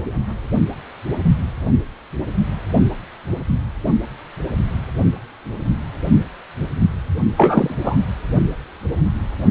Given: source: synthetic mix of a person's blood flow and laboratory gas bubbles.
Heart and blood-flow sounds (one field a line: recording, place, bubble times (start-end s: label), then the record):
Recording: Doppler ultrasound of blood flow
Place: precordium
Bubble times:
7.37-7.75 s: bubbles
7.84-7.97 s: bubbles
From the record:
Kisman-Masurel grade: 213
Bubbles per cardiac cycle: several, 3 to 8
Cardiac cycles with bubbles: 1 to 10%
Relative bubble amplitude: loud (0.450 to 0.775)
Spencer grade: 1 (occasional bubble signal discernible with the cardiac motion signal, with majority of cardiac periods free of bubbles)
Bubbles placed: only in the low amplitude regions of the cardiac cycle